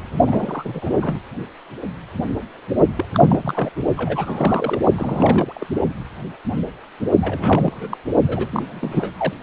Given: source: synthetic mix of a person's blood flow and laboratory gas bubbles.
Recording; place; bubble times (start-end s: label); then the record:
Doppler ultrasound of blood flow; precordium
0.26-1.20 s: bubbles
2.96-3.05 s: bubbles
3.14-3.70 s: bubbles
3.97-4.79 s: bubbles
4.97-5.67 s: bubbles
7.21-7.97 s: bubbles
8.27-9.33 s: bubbles
From the record:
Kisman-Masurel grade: 332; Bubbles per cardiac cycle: rolling drumbeat, 9 or more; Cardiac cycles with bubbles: 50 to 99%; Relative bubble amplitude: moderate (0.250 to 0.450); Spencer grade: 3 (all of the cardiac periods contain showers or single bubble signals, but not dominating or overriding the cardiac motion signals); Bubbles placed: only in the low amplitude regions of the cardiac cycle